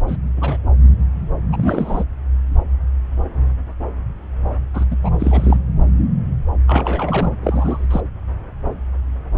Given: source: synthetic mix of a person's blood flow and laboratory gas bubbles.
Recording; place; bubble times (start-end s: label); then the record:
Doppler ultrasound of blood flow; subclavian vein
0.08-0.17 s: bubbles
0.36-0.58 s: bubbles
1.52-2.04 s: bubbles
4.74-4.85 s: bubbles
4.90-4.96 s: bubbles
5.03-5.11 s: bubbles
5.20-5.57 s: bubbles
6.67-7.32 s: bubbles
7.43-7.86 s: bubbles
7.90-8.00 s: bubbles
From the record:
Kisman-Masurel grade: 222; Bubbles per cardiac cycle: several, 3 to 8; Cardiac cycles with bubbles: 10 to 50%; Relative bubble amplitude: moderate (0.250 to 0.450); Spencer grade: 2 (many but less than half of the cardiac periods contain bubble signals, singularly or in groups); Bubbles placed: anywhere in the cardiac cycle